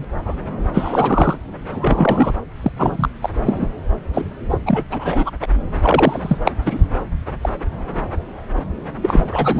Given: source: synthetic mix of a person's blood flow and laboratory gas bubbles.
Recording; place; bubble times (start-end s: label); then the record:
Doppler ultrasound of blood flow; subclavian vein
0.00-0.05 s: bubbles
0.16-0.35 s: bubbles
0.73-1.38 s: bubbles
1.71-2.33 s: bubbles
2.62-2.72 s: bubbles
2.77-3.09 s: bubbles
3.21-3.29 s: bubbles
3.44-3.69 s: bubbles
4.13-4.25 s: bubbles
4.50-4.58 s: bubbles
4.66-4.84 s: bubbles
4.91-5.30 s: bubbles
5.42-5.47 s: bubbles
5.83-6.38 s: bubbles
6.45-6.52 s: bubbles
6.62-6.85 s: bubbles
7.42-7.49 s: bubbles
9.02-9.60 s: bubbles
From the record:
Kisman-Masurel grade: 333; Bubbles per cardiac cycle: rolling drumbeat, 9 or more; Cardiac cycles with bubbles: 50 to 99%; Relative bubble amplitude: loud (0.450 to 0.775); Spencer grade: 3 (all of the cardiac periods contain showers or single bubble signals, but not dominating or overriding the cardiac motion signals); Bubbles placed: anywhere in the cardiac cycle